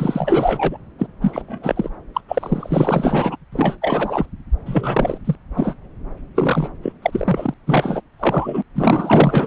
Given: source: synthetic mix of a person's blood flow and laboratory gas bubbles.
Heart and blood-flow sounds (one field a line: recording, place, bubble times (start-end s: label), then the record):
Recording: Doppler ultrasound of blood flow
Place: subclavian vein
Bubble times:
0.00-0.77 s: bubbles
0.98-1.06 s: bubbles
1.21-1.90 s: bubbles
2.14-2.21 s: bubbles
2.28-3.37 s: bubbles
3.52-3.77 s: bubbles
3.81-4.25 s: bubbles
4.66-5.17 s: bubbles
5.25-5.36 s: bubbles
5.54-5.76 s: bubbles
6.34-6.70 s: bubbles
6.82-6.92 s: bubbles
7.02-7.54 s: bubbles
7.66-8.02 s: bubbles
8.20-8.62 s: bubbles
8.75-9.47 s: bubbles
From the record:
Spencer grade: 4 (maximum detectable bubble signal sounding continuously throughout systole and diastole of every cardiac period, and overriding the amplitude of the normal cardiac signals)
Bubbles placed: anywhere in the cardiac cycle